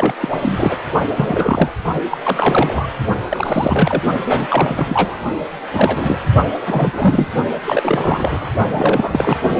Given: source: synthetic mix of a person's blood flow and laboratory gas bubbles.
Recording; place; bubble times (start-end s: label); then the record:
Doppler ultrasound of blood flow; precordium
0.00-0.15 s: bubbles
0.20-0.77 s: bubbles
1.10-1.72 s: bubbles
2.10-2.18 s: bubbles
2.23-2.88 s: bubbles
3.29-4.02 s: bubbles
4.25-5.16 s: bubbles
5.73-6.19 s: bubbles
6.61-7.27 s: bubbles
7.67-8.50 s: bubbles
8.70-9.39 s: bubbles
From the record:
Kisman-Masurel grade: 343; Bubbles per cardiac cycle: rolling drumbeat, 9 or more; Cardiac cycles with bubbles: 100%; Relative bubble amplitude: loud (0.450 to 0.775); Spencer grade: 3 (all of the cardiac periods contain showers or single bubble signals, but not dominating or overriding the cardiac motion signals); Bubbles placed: only in the low amplitude regions of the cardiac cycle